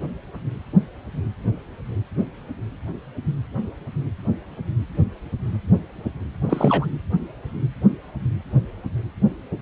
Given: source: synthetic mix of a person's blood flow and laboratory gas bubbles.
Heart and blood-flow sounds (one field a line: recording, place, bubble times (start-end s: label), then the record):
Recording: Doppler ultrasound of blood flow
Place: precordium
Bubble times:
6.45-6.86 s: bubbles
From the record:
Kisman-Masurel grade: 222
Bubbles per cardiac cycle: several, 3 to 8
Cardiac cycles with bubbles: 10 to 50%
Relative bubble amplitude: moderate (0.250 to 0.450)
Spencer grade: 2 (many but less than half of the cardiac periods contain bubble signals, singularly or in groups)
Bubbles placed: anywhere in the cardiac cycle